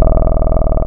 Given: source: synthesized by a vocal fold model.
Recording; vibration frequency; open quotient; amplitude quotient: sustained vowel; 20 Hz; 0.5; 1.1